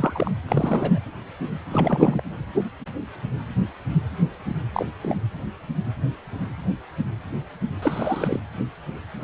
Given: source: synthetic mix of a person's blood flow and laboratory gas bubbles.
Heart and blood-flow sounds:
Doppler ultrasound of blood flow; precordium
0.00-0.31 s: bubbles
0.48-0.98 s: bubbles
1.71-2.23 s: bubbles
4.72-4.86 s: bubbles
5.01-5.19 s: bubbles
7.82-8.40 s: bubbles
From the record:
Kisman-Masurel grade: 223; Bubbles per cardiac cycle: several, 3 to 8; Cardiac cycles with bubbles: 10 to 50%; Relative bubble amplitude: loud (0.450 to 0.775); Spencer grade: 2 (many but less than half of the cardiac periods contain bubble signals, singularly or in groups); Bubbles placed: anywhere in the cardiac cycle

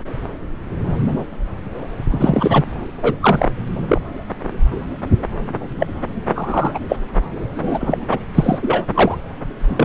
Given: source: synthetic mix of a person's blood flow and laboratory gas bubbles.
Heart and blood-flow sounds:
Doppler ultrasound of blood flow; subclavian vein
2.10-2.64 s: bubbles
3.02-3.15 s: bubbles
3.21-3.49 s: bubbles
3.88-4.02 s: bubbles
5.79-5.87 s: bubbles
6.34-6.79 s: bubbles
6.89-6.96 s: bubbles
7.08-7.10 s: bubbles
7.56-7.98 s: bubbles
8.09-8.19 s: bubbles
8.35-8.59 s: bubbles
8.62-8.85 s: bubbles
8.94-9.16 s: bubbles
9.59-9.85 s: bubbles
From the record:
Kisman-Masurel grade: 233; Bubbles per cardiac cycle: several, 3 to 8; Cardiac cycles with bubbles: 50 to 99%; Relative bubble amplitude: loud (0.450 to 0.775); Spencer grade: 3 (all of the cardiac periods contain showers or single bubble signals, but not dominating or overriding the cardiac motion signals); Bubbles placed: anywhere in the cardiac cycle

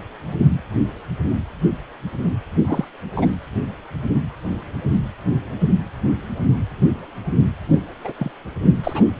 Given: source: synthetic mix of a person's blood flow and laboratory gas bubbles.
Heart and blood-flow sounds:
Doppler ultrasound of blood flow; precordium
2.67-2.84 s: bubbles
3.15-3.27 s: bubbles
8.04-8.12 s: bubbles
8.19-8.31 s: bubbles
8.83-9.05 s: bubbles
From the record:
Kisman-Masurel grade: 222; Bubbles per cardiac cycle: several, 3 to 8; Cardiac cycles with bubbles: 10 to 50%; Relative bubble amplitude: moderate (0.250 to 0.450); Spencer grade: 2 (many but less than half of the cardiac periods contain bubble signals, singularly or in groups); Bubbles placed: anywhere in the cardiac cycle

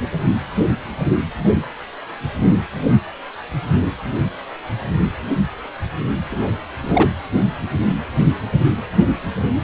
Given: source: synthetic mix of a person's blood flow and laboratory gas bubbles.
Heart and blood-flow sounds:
Doppler ultrasound of blood flow; precordium
6.32-6.53 s: bubbles
6.82-7.12 s: bubbles
From the record:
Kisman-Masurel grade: 213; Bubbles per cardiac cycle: several, 3 to 8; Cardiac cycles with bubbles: 1 to 10%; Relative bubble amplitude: loud (0.450 to 0.775); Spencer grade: 1 (occasional bubble signal discernible with the cardiac motion signal, with majority of cardiac periods free of bubbles); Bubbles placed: anywhere in the cardiac cycle

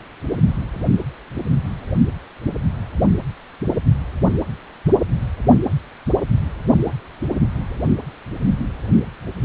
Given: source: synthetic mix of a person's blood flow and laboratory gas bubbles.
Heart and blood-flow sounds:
Doppler ultrasound of blood flow; precordium
no bubbles
From the record:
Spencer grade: 0 (complete lack of bubble signals)

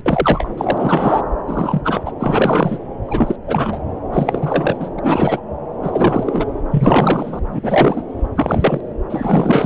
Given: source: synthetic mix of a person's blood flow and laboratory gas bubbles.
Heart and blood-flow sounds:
Doppler ultrasound of blood flow; subclavian vein
0.05-0.49 s: bubbles
0.57-1.22 s: bubbles
1.47-2.12 s: bubbles
2.20-2.79 s: bubbles
3.08-3.36 s: bubbles
3.48-3.79 s: bubbles
4.13-4.77 s: bubbles
4.79-4.90 s: bubbles
4.97-5.00 s: bubbles
5.03-5.41 s: bubbles
5.83-6.46 s: bubbles
6.71-7.40 s: bubbles
7.51-7.60 s: bubbles
7.62-8.02 s: bubbles
8.35-8.80 s: bubbles
9.09-9.66 s: bubbles
From the record:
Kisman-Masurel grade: 343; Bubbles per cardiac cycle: rolling drumbeat, 9 or more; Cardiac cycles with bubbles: 100%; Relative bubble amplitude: loud (0.450 to 0.775); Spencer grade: 3 (all of the cardiac periods contain showers or single bubble signals, but not dominating or overriding the cardiac motion signals); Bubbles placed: anywhere in the cardiac cycle

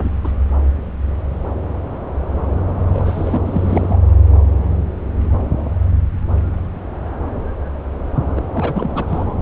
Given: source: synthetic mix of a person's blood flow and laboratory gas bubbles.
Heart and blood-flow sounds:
Doppler ultrasound of blood flow; subclavian vein
0.00-0.09 s: bubbles
0.24-0.32 s: bubbles
2.93-3.42 s: bubbles
3.45-3.97 s: bubbles
8.35-8.40 s: bubbles
8.54-9.05 s: bubbles
9.07-9.34 s: bubbles
From the record:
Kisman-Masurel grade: 332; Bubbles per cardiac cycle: rolling drumbeat, 9 or more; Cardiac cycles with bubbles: 50 to 99%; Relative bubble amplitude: moderate (0.250 to 0.450); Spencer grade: 3 (all of the cardiac periods contain showers or single bubble signals, but not dominating or overriding the cardiac motion signals); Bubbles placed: anywhere in the cardiac cycle

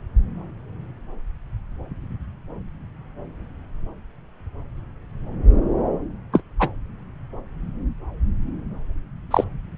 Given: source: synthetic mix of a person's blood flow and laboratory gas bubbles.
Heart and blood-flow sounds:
Doppler ultrasound of blood flow; subclavian vein
6.33-6.43 s: bubbles
6.59-6.70 s: bubbles
9.30-9.44 s: bubbles
From the record:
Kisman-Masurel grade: 123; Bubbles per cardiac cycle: 1 to 2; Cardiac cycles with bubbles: 10 to 50%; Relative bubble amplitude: loud (0.450 to 0.775); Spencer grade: 2 (many but less than half of the cardiac periods contain bubble signals, singularly or in groups); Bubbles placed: anywhere in the cardiac cycle

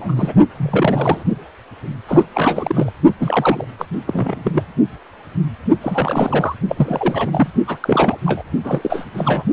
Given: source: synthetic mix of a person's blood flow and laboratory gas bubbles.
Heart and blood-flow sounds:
Doppler ultrasound of blood flow; precordium
0.00-0.34 s: bubbles
0.57-1.24 s: bubbles
2.08-2.27 s: bubbles
2.33-2.92 s: bubbles
3.18-3.65 s: bubbles
3.78-3.85 s: bubbles
4.07-4.64 s: bubbles
5.81-6.56 s: bubbles
6.68-7.48 s: bubbles
7.67-7.78 s: bubbles
7.81-8.20 s: bubbles
8.25-8.42 s: bubbles
8.63-9.05 s: bubbles
9.13-9.43 s: bubbles
From the record:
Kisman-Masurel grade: 332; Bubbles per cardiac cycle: rolling drumbeat, 9 or more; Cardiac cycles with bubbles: 50 to 99%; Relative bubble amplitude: moderate (0.250 to 0.450); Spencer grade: 3 (all of the cardiac periods contain showers or single bubble signals, but not dominating or overriding the cardiac motion signals); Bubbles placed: only in the low amplitude regions of the cardiac cycle

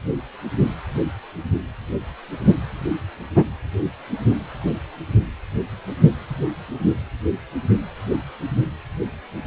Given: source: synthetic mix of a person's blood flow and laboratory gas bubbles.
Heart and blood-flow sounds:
Doppler ultrasound of blood flow; precordium
3.35-3.44 s: bubbles
From the record:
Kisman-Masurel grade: 112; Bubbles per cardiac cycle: 1 to 2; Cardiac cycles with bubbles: 1 to 10%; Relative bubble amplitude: moderate (0.250 to 0.450); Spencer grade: 1 (occasional bubble signal discernible with the cardiac motion signal, with majority of cardiac periods free of bubbles); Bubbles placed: anywhere in the cardiac cycle

